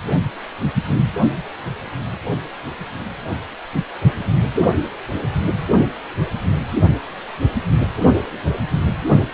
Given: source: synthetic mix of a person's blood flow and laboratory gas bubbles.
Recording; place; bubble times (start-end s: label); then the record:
Doppler ultrasound of blood flow; precordium
no bubbles
From the record:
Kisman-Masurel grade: 000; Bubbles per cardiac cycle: 0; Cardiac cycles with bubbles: 0%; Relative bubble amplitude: no bubbles discernible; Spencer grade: 0 (complete lack of bubble signals)